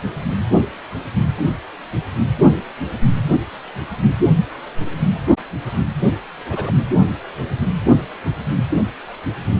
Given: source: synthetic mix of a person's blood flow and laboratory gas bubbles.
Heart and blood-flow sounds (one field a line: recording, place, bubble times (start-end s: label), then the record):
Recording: Doppler ultrasound of blood flow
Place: precordium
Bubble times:
6.50-6.72 s: bubbles
From the record:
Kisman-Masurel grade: 111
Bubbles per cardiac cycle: 1 to 2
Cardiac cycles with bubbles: 1 to 10%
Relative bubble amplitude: barely perceptible (0.100 to 0.250)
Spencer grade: 1 (occasional bubble signal discernible with the cardiac motion signal, with majority of cardiac periods free of bubbles)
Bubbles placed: anywhere in the cardiac cycle